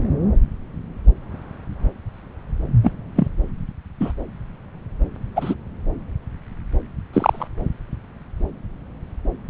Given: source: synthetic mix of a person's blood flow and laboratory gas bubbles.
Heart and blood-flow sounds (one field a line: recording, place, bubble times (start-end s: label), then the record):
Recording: Doppler ultrasound of blood flow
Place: subclavian vein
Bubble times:
2.83-2.91 s: bubbles
3.15-3.27 s: bubbles
4.00-4.12 s: bubbles
5.36-5.54 s: bubbles
7.13-7.48 s: bubbles
From the record:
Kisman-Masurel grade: 123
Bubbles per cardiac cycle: 1 to 2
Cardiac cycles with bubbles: 10 to 50%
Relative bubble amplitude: loud (0.450 to 0.775)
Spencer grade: 2 (many but less than half of the cardiac periods contain bubble signals, singularly or in groups)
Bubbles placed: anywhere in the cardiac cycle